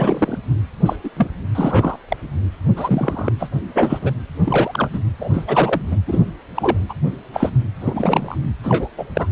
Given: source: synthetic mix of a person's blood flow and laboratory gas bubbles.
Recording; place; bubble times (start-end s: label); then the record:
Doppler ultrasound of blood flow; precordium
0.00-0.39 s: bubbles
0.85-0.96 s: bubbles
1.03-1.10 s: bubbles
1.17-1.28 s: bubbles
1.55-1.96 s: bubbles
2.08-2.17 s: bubbles
2.76-3.32 s: bubbles
3.38-3.48 s: bubbles
3.74-4.11 s: bubbles
4.43-4.89 s: bubbles
4.92-4.99 s: bubbles
5.20-5.31 s: bubbles
5.33-5.45 s: bubbles
5.48-5.82 s: bubbles
5.91-5.96 s: bubbles
6.07-6.21 s: bubbles
6.54-6.77 s: bubbles
6.89-6.94 s: bubbles
7.33-7.50 s: bubbles
7.81-8.38 s: bubbles
8.63-8.88 s: bubbles
8.97-9.04 s: bubbles
9.13-9.27 s: bubbles
From the record:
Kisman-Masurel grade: 243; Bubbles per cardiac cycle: several, 3 to 8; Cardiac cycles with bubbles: 100%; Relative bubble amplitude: loud (0.450 to 0.775); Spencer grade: 3 (all of the cardiac periods contain showers or single bubble signals, but not dominating or overriding the cardiac motion signals); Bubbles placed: anywhere in the cardiac cycle